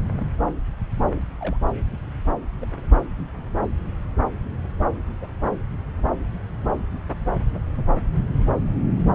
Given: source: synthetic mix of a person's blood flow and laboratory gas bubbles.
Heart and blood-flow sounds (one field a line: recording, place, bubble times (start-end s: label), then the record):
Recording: Doppler ultrasound of blood flow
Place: subclavian vein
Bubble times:
0.19-0.27 s: bubbles
1.16-1.22 s: bubbles
1.41-1.57 s: bubbles
2.61-2.71 s: bubbles
3.38-3.43 s: bubbles
5.21-5.29 s: bubbles
7.54-7.59 s: bubbles
7.77-7.85 s: bubbles
From the record:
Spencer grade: 2 (many but less than half of the cardiac periods contain bubble signals, singularly or in groups)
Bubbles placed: anywhere in the cardiac cycle